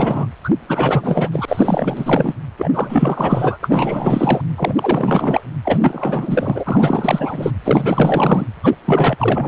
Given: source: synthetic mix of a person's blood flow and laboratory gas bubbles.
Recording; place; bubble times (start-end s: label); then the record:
Doppler ultrasound of blood flow; precordium
0.00-0.27 s: bubbles
0.43-0.49 s: bubbles
0.68-1.29 s: bubbles
1.31-2.34 s: bubbles
2.58-2.70 s: bubbles
2.73-3.57 s: bubbles
3.63-4.41 s: bubbles
4.57-5.47 s: bubbles
5.64-7.50 s: bubbles
7.64-8.46 s: bubbles
8.63-8.75 s: bubbles
8.85-9.48 s: bubbles
From the record:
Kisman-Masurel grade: 444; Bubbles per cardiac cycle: continuous sound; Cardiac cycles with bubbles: 100%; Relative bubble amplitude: maximal (0.775 to 0.999); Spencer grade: 4 (maximum detectable bubble signal sounding continuously throughout systole and diastole of every cardiac period, and overriding the amplitude of the normal cardiac signals); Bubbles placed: anywhere in the cardiac cycle